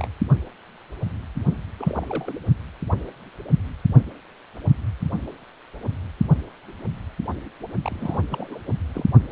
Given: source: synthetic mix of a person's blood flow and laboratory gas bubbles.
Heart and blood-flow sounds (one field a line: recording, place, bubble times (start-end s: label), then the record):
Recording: Doppler ultrasound of blood flow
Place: precordium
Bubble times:
0.00-0.07 s: bubbles
1.78-2.34 s: bubbles
7.84-8.20 s: bubbles
8.30-8.59 s: bubbles
8.66-8.75 s: bubbles
8.94-9.04 s: bubbles
From the record:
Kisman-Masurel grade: 221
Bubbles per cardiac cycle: several, 3 to 8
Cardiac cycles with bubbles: 10 to 50%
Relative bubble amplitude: barely perceptible (0.100 to 0.250)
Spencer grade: 2 (many but less than half of the cardiac periods contain bubble signals, singularly or in groups)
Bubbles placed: only in the low amplitude regions of the cardiac cycle